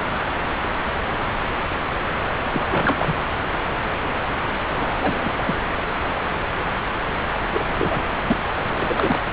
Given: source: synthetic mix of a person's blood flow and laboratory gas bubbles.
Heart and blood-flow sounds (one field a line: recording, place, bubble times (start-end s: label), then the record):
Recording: Doppler ultrasound of blood flow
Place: subclavian vein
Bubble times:
2.52-2.60 s: bubbles
2.70-3.13 s: bubbles
4.75-5.31 s: bubbles
5.38-5.59 s: bubbles
7.51-7.64 s: bubbles
7.78-8.04 s: bubbles
8.26-8.37 s: bubbles
8.65-9.18 s: bubbles
From the record:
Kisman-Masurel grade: 222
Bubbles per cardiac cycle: several, 3 to 8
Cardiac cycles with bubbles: 10 to 50%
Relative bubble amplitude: moderate (0.250 to 0.450)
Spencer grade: 2 (many but less than half of the cardiac periods contain bubble signals, singularly or in groups)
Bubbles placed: anywhere in the cardiac cycle